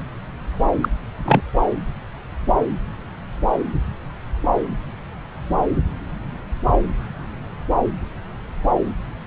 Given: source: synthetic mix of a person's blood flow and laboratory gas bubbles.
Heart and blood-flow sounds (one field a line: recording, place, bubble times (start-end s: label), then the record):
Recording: Doppler ultrasound of blood flow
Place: subclavian vein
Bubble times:
0.81-0.89 s: bubbles
1.25-1.41 s: bubbles
From the record:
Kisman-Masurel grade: 123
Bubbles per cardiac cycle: 1 to 2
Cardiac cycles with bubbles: 10 to 50%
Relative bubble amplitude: loud (0.450 to 0.775)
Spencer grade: 2 (many but less than half of the cardiac periods contain bubble signals, singularly or in groups)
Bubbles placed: anywhere in the cardiac cycle